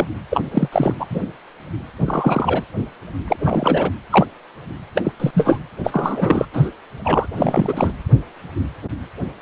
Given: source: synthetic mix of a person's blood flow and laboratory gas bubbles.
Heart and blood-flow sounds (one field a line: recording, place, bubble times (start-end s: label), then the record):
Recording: Doppler ultrasound of blood flow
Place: precordium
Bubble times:
0.00-0.06 s: bubbles
0.31-0.41 s: bubbles
0.51-0.68 s: bubbles
0.72-0.94 s: bubbles
0.98-1.06 s: bubbles
1.10-1.20 s: bubbles
2.00-2.64 s: bubbles
3.27-3.90 s: bubbles
4.11-4.26 s: bubbles
4.94-5.12 s: bubbles
5.19-5.57 s: bubbles
5.83-6.46 s: bubbles
6.53-6.71 s: bubbles
7.04-7.26 s: bubbles
7.35-7.92 s: bubbles
From the record:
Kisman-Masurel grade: 233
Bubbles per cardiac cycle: several, 3 to 8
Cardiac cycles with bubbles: 50 to 99%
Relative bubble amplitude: loud (0.450 to 0.775)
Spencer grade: 3 (all of the cardiac periods contain showers or single bubble signals, but not dominating or overriding the cardiac motion signals)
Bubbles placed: anywhere in the cardiac cycle